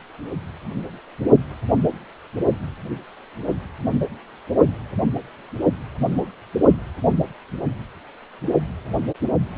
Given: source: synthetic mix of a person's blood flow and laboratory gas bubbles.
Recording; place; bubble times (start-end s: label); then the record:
Doppler ultrasound of blood flow; precordium
no bubbles
From the record:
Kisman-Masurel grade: 000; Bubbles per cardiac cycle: 0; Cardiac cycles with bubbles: 0%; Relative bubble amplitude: no bubbles discernible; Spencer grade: 0 (complete lack of bubble signals)